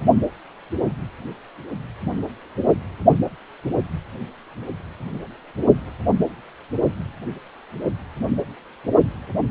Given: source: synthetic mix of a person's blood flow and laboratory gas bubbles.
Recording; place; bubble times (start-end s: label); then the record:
Doppler ultrasound of blood flow; precordium
no bubbles
From the record:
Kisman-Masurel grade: 000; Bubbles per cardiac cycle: 0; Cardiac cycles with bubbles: 0%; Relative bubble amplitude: no bubbles discernible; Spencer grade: 0 (complete lack of bubble signals)